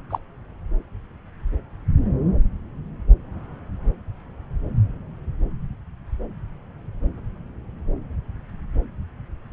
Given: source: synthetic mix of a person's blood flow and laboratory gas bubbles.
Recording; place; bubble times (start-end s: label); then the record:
Doppler ultrasound of blood flow; subclavian vein
0.10-0.19 s: bubbles
From the record:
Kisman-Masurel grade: 122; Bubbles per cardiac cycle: 1 to 2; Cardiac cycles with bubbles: 10 to 50%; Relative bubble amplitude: moderate (0.250 to 0.450); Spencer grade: 2 (many but less than half of the cardiac periods contain bubble signals, singularly or in groups); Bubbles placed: anywhere in the cardiac cycle